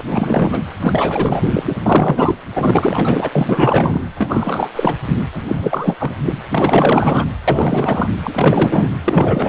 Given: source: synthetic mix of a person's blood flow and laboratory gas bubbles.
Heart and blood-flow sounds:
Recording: Doppler ultrasound of blood flow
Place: precordium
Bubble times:
0.00-0.03 s: bubbles
0.12-0.61 s: bubbles
0.80-1.42 s: bubbles
1.46-1.76 s: bubbles
1.86-2.35 s: bubbles
2.55-3.29 s: bubbles
3.32-4.02 s: bubbles
4.14-4.69 s: bubbles
4.75-4.96 s: bubbles
5.33-5.42 s: bubbles
5.47-5.97 s: bubbles
6.00-6.15 s: bubbles
6.25-6.33 s: bubbles
6.51-7.25 s: bubbles
7.47-8.12 s: bubbles
8.23-8.89 s: bubbles
9.04-9.49 s: bubbles
From the record:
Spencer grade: 4 (maximum detectable bubble signal sounding continuously throughout systole and diastole of every cardiac period, and overriding the amplitude of the normal cardiac signals)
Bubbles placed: anywhere in the cardiac cycle

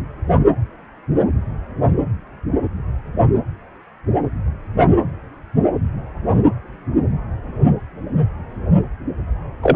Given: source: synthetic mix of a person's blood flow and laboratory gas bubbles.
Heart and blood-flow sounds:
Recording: Doppler ultrasound of blood flow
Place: precordium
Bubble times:
9.62-9.76 s: bubbles
From the record:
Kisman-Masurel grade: 113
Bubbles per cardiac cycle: 1 to 2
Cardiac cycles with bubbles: 1 to 10%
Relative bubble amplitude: loud (0.450 to 0.775)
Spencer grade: 1 (occasional bubble signal discernible with the cardiac motion signal, with majority of cardiac periods free of bubbles)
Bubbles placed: anywhere in the cardiac cycle

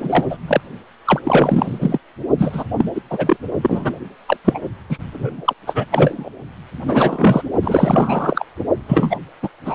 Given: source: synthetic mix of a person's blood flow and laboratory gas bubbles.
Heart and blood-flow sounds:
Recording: Doppler ultrasound of blood flow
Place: precordium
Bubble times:
0.00-0.26 s: bubbles
0.29-0.38 s: bubbles
0.47-0.60 s: bubbles
1.05-1.20 s: bubbles
1.24-1.98 s: bubbles
2.38-2.64 s: bubbles
2.78-2.90 s: bubbles
2.95-3.02 s: bubbles
3.10-3.37 s: bubbles
3.62-3.99 s: bubbles
4.27-4.37 s: bubbles
4.45-4.59 s: bubbles
4.89-4.98 s: bubbles
5.12-5.54 s: bubbles
5.67-5.86 s: bubbles
5.91-6.30 s: bubbles
6.86-7.43 s: bubbles
7.62-8.44 s: bubbles
8.88-9.19 s: bubbles
9.42-9.49 s: bubbles
9.64-9.75 s: bubbles
From the record:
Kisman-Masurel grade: 333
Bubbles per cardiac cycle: rolling drumbeat, 9 or more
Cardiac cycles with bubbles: 50 to 99%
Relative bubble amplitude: loud (0.450 to 0.775)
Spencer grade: 3 (all of the cardiac periods contain showers or single bubble signals, but not dominating or overriding the cardiac motion signals)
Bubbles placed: only in the low amplitude regions of the cardiac cycle

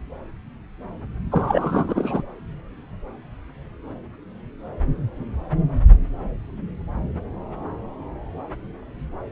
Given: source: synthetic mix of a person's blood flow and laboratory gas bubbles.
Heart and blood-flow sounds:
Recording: Doppler ultrasound of blood flow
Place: subclavian vein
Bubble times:
1.31-2.22 s: bubbles
From the record:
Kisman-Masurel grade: 223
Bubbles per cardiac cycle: several, 3 to 8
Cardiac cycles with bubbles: 10 to 50%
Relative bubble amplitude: loud (0.450 to 0.775)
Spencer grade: 2 (many but less than half of the cardiac periods contain bubble signals, singularly or in groups)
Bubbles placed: anywhere in the cardiac cycle

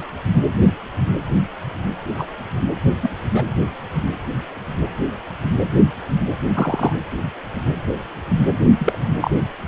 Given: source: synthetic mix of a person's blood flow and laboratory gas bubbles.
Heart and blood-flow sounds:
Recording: Doppler ultrasound of blood flow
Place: precordium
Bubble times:
0.00-0.03 s: bubbles
2.18-2.27 s: bubbles
3.02-3.09 s: bubbles
3.34-3.44 s: bubbles
6.54-6.93 s: bubbles
8.78-8.98 s: bubbles
9.21-9.31 s: bubbles
From the record:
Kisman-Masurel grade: 123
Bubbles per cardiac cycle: 1 to 2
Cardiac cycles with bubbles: 10 to 50%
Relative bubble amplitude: loud (0.450 to 0.775)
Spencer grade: 2 (many but less than half of the cardiac periods contain bubble signals, singularly or in groups)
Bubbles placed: anywhere in the cardiac cycle

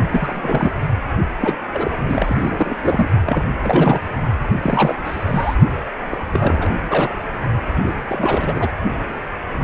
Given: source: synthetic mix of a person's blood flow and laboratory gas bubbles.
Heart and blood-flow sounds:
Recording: Doppler ultrasound of blood flow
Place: precordium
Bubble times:
0.10-0.71 s: bubbles
1.42-1.57 s: bubbles
1.73-1.91 s: bubbles
2.08-2.77 s: bubbles
2.82-3.09 s: bubbles
3.26-3.45 s: bubbles
3.62-4.02 s: bubbles
4.62-4.96 s: bubbles
5.04-5.56 s: bubbles
6.09-6.17 s: bubbles
6.33-6.75 s: bubbles
6.88-7.11 s: bubbles
7.83-8.69 s: bubbles
From the record:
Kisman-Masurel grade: 332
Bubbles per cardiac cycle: rolling drumbeat, 9 or more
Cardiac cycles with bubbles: 50 to 99%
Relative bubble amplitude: moderate (0.250 to 0.450)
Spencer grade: 3 (all of the cardiac periods contain showers or single bubble signals, but not dominating or overriding the cardiac motion signals)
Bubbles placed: only in the low amplitude regions of the cardiac cycle

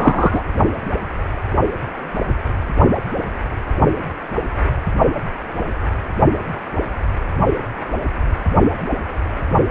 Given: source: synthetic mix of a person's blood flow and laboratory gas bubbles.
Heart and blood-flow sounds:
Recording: Doppler ultrasound of blood flow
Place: precordium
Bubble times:
0.00-0.42 s: bubbles
From the record:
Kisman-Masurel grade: 213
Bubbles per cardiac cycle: several, 3 to 8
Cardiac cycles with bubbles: 1 to 10%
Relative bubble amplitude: loud (0.450 to 0.775)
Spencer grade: 1 (occasional bubble signal discernible with the cardiac motion signal, with majority of cardiac periods free of bubbles)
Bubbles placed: only in the low amplitude regions of the cardiac cycle

